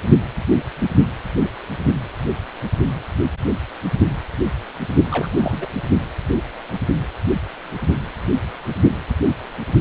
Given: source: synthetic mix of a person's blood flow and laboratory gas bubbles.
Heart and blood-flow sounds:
Doppler ultrasound of blood flow; precordium
5.11-5.67 s: bubbles
From the record:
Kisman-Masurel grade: 211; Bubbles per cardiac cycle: several, 3 to 8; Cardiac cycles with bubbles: 1 to 10%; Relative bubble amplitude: barely perceptible (0.100 to 0.250); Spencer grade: 1 (occasional bubble signal discernible with the cardiac motion signal, with majority of cardiac periods free of bubbles); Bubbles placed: only in the low amplitude regions of the cardiac cycle

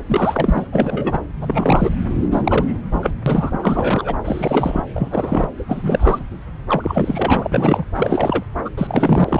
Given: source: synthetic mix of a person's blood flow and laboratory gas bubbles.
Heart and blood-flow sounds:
Doppler ultrasound of blood flow; subclavian vein
0.06-0.66 s: bubbles
0.72-1.20 s: bubbles
1.41-1.96 s: bubbles
2.21-2.27 s: bubbles
2.31-2.76 s: bubbles
2.92-3.10 s: bubbles
3.26-3.58 s: bubbles
3.62-4.16 s: bubbles
4.24-4.82 s: bubbles
4.94-5.48 s: bubbles
5.58-6.23 s: bubbles
6.68-7.48 s: bubbles
7.51-7.83 s: bubbles
7.95-8.43 s: bubbles
8.64-8.70 s: bubbles
8.77-9.40 s: bubbles
From the record:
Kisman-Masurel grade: 343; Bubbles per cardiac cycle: rolling drumbeat, 9 or more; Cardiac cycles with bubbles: 100%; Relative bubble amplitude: loud (0.450 to 0.775); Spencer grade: 3 (all of the cardiac periods contain showers or single bubble signals, but not dominating or overriding the cardiac motion signals); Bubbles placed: anywhere in the cardiac cycle

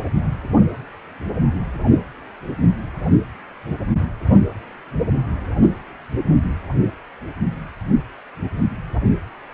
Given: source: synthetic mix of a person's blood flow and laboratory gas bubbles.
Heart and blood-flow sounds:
Doppler ultrasound of blood flow; precordium
no bubbles
From the record:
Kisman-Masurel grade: 000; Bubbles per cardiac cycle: 0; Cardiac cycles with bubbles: 0%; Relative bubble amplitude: no bubbles discernible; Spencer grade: 0 (complete lack of bubble signals)

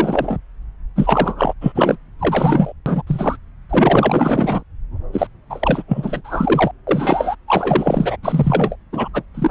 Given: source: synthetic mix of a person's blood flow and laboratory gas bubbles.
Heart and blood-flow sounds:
Doppler ultrasound of blood flow; subclavian vein
0.00-0.38 s: bubbles
0.95-1.53 s: bubbles
1.61-1.96 s: bubbles
2.19-2.73 s: bubbles
2.86-3.02 s: bubbles
3.06-3.37 s: bubbles
3.69-4.63 s: bubbles
5.12-5.27 s: bubbles
5.50-5.83 s: bubbles
5.88-6.21 s: bubbles
6.24-6.71 s: bubbles
6.87-7.35 s: bubbles
7.48-8.17 s: bubbles
8.22-8.76 s: bubbles
8.93-9.08 s: bubbles
9.13-9.23 s: bubbles
9.34-9.51 s: bubbles
From the record:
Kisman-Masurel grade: 444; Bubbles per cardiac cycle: continuous sound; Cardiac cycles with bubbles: 100%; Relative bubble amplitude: maximal (0.775 to 0.999); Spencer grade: 4 (maximum detectable bubble signal sounding continuously throughout systole and diastole of every cardiac period, and overriding the amplitude of the normal cardiac signals); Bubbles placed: anywhere in the cardiac cycle

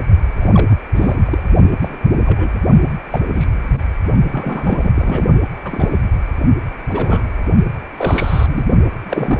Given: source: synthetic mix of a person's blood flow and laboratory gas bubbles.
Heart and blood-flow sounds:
Doppler ultrasound of blood flow; precordium
0.37-0.77 s: bubbles
0.95-1.20 s: bubbles
1.25-1.43 s: bubbles
1.81-1.96 s: bubbles
2.25-2.53 s: bubbles
3.11-3.19 s: bubbles
3.31-3.47 s: bubbles
3.67-3.84 s: bubbles
4.32-4.91 s: bubbles
4.94-5.26 s: bubbles
5.64-5.97 s: bubbles
6.90-7.31 s: bubbles
7.97-8.64 s: bubbles
8.90-9.40 s: bubbles
From the record:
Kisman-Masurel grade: 232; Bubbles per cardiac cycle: several, 3 to 8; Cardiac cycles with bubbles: 50 to 99%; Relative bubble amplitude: moderate (0.250 to 0.450); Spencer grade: 3 (all of the cardiac periods contain showers or single bubble signals, but not dominating or overriding the cardiac motion signals); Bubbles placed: only in the low amplitude regions of the cardiac cycle

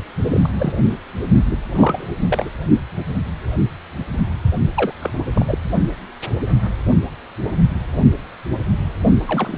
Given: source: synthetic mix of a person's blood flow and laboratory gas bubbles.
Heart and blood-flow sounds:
Doppler ultrasound of blood flow; precordium
0.30-0.49 s: bubbles
0.59-0.72 s: bubbles
1.51-1.56 s: bubbles
1.75-2.07 s: bubbles
2.27-2.49 s: bubbles
4.76-4.93 s: bubbles
5.00-5.10 s: bubbles
5.13-5.20 s: bubbles
5.33-5.58 s: bubbles
9.27-9.57 s: bubbles
From the record:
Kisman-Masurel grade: 232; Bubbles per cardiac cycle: several, 3 to 8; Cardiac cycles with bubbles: 50 to 99%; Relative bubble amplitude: moderate (0.250 to 0.450); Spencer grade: 3 (all of the cardiac periods contain showers or single bubble signals, but not dominating or overriding the cardiac motion signals); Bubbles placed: only in the low amplitude regions of the cardiac cycle

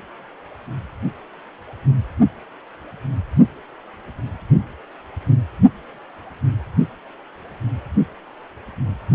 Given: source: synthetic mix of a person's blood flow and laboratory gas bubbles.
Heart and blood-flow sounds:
Doppler ultrasound of blood flow; precordium
9.12-9.15 s: bubbles
From the record:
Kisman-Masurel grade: 212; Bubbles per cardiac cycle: several, 3 to 8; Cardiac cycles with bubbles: 1 to 10%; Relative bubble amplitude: moderate (0.250 to 0.450); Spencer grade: 1 (occasional bubble signal discernible with the cardiac motion signal, with majority of cardiac periods free of bubbles); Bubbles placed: anywhere in the cardiac cycle

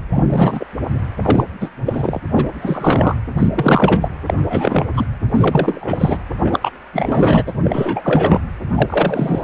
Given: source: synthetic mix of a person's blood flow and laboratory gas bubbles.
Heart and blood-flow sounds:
Doppler ultrasound of blood flow; precordium
0.11-0.24 s: bubbles
0.27-0.66 s: bubbles
1.21-1.44 s: bubbles
1.60-1.69 s: bubbles
1.85-2.19 s: bubbles
2.34-2.46 s: bubbles
2.62-3.15 s: bubbles
3.33-3.48 s: bubbles
3.53-4.14 s: bubbles
4.27-4.34 s: bubbles
4.46-4.86 s: bubbles
4.95-5.05 s: bubbles
5.34-6.18 s: bubbles
6.44-6.70 s: bubbles
6.93-7.43 s: bubbles
7.47-7.52 s: bubbles
7.62-8.41 s: bubbles
8.74-9.44 s: bubbles
From the record:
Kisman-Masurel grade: 343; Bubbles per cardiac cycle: rolling drumbeat, 9 or more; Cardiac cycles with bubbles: 100%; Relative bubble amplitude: loud (0.450 to 0.775); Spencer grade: 3 (all of the cardiac periods contain showers or single bubble signals, but not dominating or overriding the cardiac motion signals); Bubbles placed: anywhere in the cardiac cycle

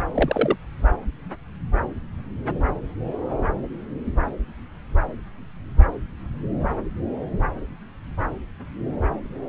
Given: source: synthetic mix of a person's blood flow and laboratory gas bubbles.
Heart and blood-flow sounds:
Doppler ultrasound of blood flow; subclavian vein
0.14-0.56 s: bubbles
From the record:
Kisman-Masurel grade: 122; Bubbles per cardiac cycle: 1 to 2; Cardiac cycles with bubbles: 10 to 50%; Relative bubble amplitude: moderate (0.250 to 0.450); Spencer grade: 2 (many but less than half of the cardiac periods contain bubble signals, singularly or in groups); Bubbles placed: anywhere in the cardiac cycle

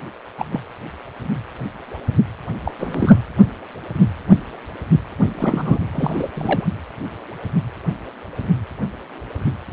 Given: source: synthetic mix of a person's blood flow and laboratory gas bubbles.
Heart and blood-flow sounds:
Doppler ultrasound of blood flow; precordium
0.00-0.05 s: bubbles
0.38-0.45 s: bubbles
0.52-0.60 s: bubbles
2.65-2.71 s: bubbles
2.79-3.17 s: bubbles
5.38-5.79 s: bubbles
5.94-6.29 s: bubbles
6.34-6.68 s: bubbles
From the record:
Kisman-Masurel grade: 222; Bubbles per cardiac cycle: several, 3 to 8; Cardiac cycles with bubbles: 10 to 50%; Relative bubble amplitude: moderate (0.250 to 0.450); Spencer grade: 2 (many but less than half of the cardiac periods contain bubble signals, singularly or in groups); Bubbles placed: anywhere in the cardiac cycle

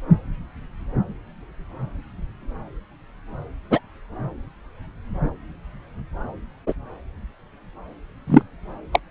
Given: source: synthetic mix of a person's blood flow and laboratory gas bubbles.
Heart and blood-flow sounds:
Doppler ultrasound of blood flow; subclavian vein
3.71-3.80 s: bubbles
6.67-6.73 s: bubbles
8.27-8.42 s: bubbles
8.92-8.99 s: bubbles
From the record:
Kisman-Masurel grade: 123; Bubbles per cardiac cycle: 1 to 2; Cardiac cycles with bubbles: 10 to 50%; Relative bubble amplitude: loud (0.450 to 0.775); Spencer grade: 2 (many but less than half of the cardiac periods contain bubble signals, singularly or in groups); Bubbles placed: anywhere in the cardiac cycle

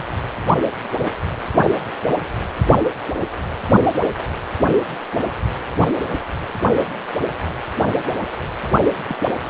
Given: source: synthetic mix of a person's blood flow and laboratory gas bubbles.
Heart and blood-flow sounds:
Doppler ultrasound of blood flow; precordium
0.95-1.05 s: bubbles
9.07-9.15 s: bubbles
From the record:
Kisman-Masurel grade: 121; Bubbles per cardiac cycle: 1 to 2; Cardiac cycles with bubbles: 10 to 50%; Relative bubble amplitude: barely perceptible (0.100 to 0.250); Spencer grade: 2 (many but less than half of the cardiac periods contain bubble signals, singularly or in groups); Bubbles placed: anywhere in the cardiac cycle

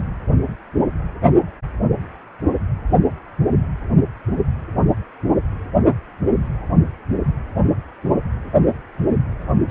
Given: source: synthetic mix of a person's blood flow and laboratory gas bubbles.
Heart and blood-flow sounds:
Doppler ultrasound of blood flow; precordium
9.69-9.71 s: bubbles
From the record:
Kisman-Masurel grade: 223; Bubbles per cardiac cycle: several, 3 to 8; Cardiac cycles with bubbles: 10 to 50%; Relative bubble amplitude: loud (0.450 to 0.775); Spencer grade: 2 (many but less than half of the cardiac periods contain bubble signals, singularly or in groups); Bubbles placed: anywhere in the cardiac cycle

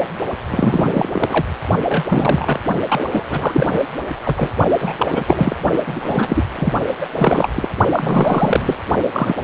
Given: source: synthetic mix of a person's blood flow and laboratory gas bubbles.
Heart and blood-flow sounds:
Doppler ultrasound of blood flow; precordium
0.00-0.02 s: bubbles
0.50-1.08 s: bubbles
1.12-1.46 s: bubbles
1.89-2.04 s: bubbles
2.08-2.60 s: bubbles
2.89-3.04 s: bubbles
3.12-3.27 s: bubbles
3.30-3.85 s: bubbles
4.23-4.50 s: bubbles
4.80-5.55 s: bubbles
5.87-6.44 s: bubbles
6.55-6.73 s: bubbles
7.00-7.06 s: bubbles
7.15-7.49 s: bubbles
7.55-7.68 s: bubbles
7.92-8.76 s: bubbles
9.12-9.35 s: bubbles
From the record:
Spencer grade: 3 (all of the cardiac periods contain showers or single bubble signals, but not dominating or overriding the cardiac motion signals); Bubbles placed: only in the low amplitude regions of the cardiac cycle

